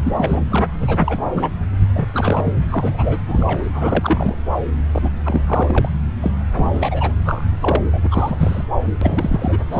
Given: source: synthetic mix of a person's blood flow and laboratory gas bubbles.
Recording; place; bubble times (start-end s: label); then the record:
Doppler ultrasound of blood flow; subclavian vein
0.00-0.68 s: bubbles
0.79-1.50 s: bubbles
1.95-2.09 s: bubbles
2.13-2.53 s: bubbles
2.70-3.18 s: bubbles
3.27-3.64 s: bubbles
3.73-4.42 s: bubbles
4.92-5.10 s: bubbles
5.23-5.42 s: bubbles
5.46-5.89 s: bubbles
6.21-6.31 s: bubbles
6.54-6.67 s: bubbles
6.73-7.13 s: bubbles
7.18-7.44 s: bubbles
7.60-7.82 s: bubbles
7.92-8.65 s: bubbles
9.01-9.59 s: bubbles
9.71-9.80 s: bubbles
From the record:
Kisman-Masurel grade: 342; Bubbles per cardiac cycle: rolling drumbeat, 9 or more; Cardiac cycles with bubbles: 100%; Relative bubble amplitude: moderate (0.250 to 0.450); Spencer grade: 3 (all of the cardiac periods contain showers or single bubble signals, but not dominating or overriding the cardiac motion signals); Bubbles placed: anywhere in the cardiac cycle